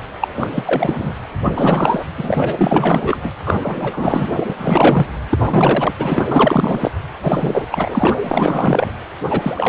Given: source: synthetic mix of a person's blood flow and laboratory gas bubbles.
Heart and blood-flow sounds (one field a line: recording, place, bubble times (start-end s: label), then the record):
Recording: Doppler ultrasound of blood flow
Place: precordium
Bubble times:
0.20-0.28 s: bubbles
0.36-0.52 s: bubbles
0.55-1.15 s: bubbles
1.44-2.05 s: bubbles
2.17-3.31 s: bubbles
3.46-4.44 s: bubbles
4.50-4.54 s: bubbles
4.57-5.07 s: bubbles
5.29-5.94 s: bubbles
5.97-6.28 s: bubbles
6.31-6.92 s: bubbles
7.23-7.66 s: bubbles
7.70-8.15 s: bubbles
8.21-8.92 s: bubbles
9.29-9.69 s: bubbles
From the record:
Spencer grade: 4 (maximum detectable bubble signal sounding continuously throughout systole and diastole of every cardiac period, and overriding the amplitude of the normal cardiac signals)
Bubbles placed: anywhere in the cardiac cycle